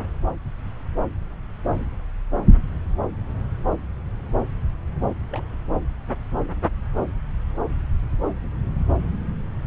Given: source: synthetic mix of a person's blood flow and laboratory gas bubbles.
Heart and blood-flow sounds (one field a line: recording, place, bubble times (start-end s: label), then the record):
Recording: Doppler ultrasound of blood flow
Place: subclavian vein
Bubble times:
5.30-5.48 s: bubbles
From the record:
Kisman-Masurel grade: 111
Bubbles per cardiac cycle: 1 to 2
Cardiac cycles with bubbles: 1 to 10%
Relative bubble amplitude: barely perceptible (0.100 to 0.250)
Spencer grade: 1 (occasional bubble signal discernible with the cardiac motion signal, with majority of cardiac periods free of bubbles)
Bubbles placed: anywhere in the cardiac cycle